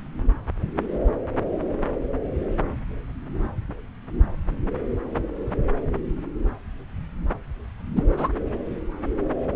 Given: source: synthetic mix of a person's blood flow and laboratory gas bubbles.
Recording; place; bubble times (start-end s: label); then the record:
Doppler ultrasound of blood flow; subclavian vein
7.95-8.03 s: bubbles
8.17-8.30 s: bubbles
From the record:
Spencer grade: 1 (occasional bubble signal discernible with the cardiac motion signal, with majority of cardiac periods free of bubbles); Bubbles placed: anywhere in the cardiac cycle